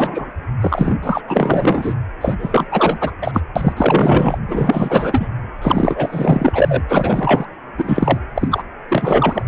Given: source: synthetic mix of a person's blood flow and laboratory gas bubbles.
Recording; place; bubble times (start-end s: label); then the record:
Doppler ultrasound of blood flow; precordium
0.00-0.30 s: bubbles
0.60-0.94 s: bubbles
1.02-1.22 s: bubbles
1.27-1.94 s: bubbles
2.21-2.35 s: bubbles
2.38-2.67 s: bubbles
2.71-3.11 s: bubbles
3.21-3.41 s: bubbles
3.56-3.73 s: bubbles
3.77-4.38 s: bubbles
4.48-5.29 s: bubbles
5.62-6.83 s: bubbles
6.89-7.47 s: bubbles
7.78-8.19 s: bubbles
8.35-8.63 s: bubbles
8.89-9.43 s: bubbles
From the record:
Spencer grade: 4 (maximum detectable bubble signal sounding continuously throughout systole and diastole of every cardiac period, and overriding the amplitude of the normal cardiac signals); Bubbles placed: anywhere in the cardiac cycle